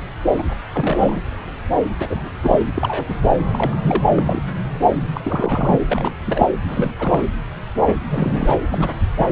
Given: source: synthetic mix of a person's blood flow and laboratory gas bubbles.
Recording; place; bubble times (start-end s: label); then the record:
Doppler ultrasound of blood flow; subclavian vein
0.38-0.43 s: bubbles
0.73-1.22 s: bubbles
1.99-2.29 s: bubbles
2.42-2.59 s: bubbles
2.75-3.04 s: bubbles
3.08-3.15 s: bubbles
3.52-3.76 s: bubbles
3.81-4.04 s: bubbles
4.16-4.41 s: bubbles
5.13-5.21 s: bubbles
5.23-5.79 s: bubbles
5.86-6.15 s: bubbles
6.26-6.47 s: bubbles
6.67-6.96 s: bubbles
6.98-7.28 s: bubbles
8.10-8.58 s: bubbles
8.71-8.90 s: bubbles
9.17-9.27 s: bubbles
From the record:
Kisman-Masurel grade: 232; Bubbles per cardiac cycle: several, 3 to 8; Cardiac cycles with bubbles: 50 to 99%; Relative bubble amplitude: moderate (0.250 to 0.450); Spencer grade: 3 (all of the cardiac periods contain showers or single bubble signals, but not dominating or overriding the cardiac motion signals); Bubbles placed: anywhere in the cardiac cycle